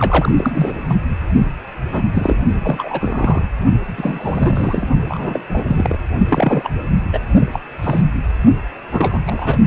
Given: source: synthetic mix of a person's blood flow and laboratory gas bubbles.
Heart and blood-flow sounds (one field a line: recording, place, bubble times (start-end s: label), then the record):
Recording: Doppler ultrasound of blood flow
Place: precordium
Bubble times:
0.00-0.73 s: bubbles
0.89-0.94 s: bubbles
1.92-2.02 s: bubbles
2.13-2.36 s: bubbles
2.58-3.42 s: bubbles
3.97-4.88 s: bubbles
5.08-5.41 s: bubbles
5.49-5.64 s: bubbles
5.67-5.99 s: bubbles
6.29-6.68 s: bubbles
7.12-7.20 s: bubbles
7.51-7.59 s: bubbles
7.83-8.02 s: bubbles
8.90-9.20 s: bubbles
9.26-9.57 s: bubbles
From the record:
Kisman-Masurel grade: 232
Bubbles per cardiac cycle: several, 3 to 8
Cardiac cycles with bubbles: 50 to 99%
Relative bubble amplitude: moderate (0.250 to 0.450)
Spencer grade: 3 (all of the cardiac periods contain showers or single bubble signals, but not dominating or overriding the cardiac motion signals)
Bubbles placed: only in the low amplitude regions of the cardiac cycle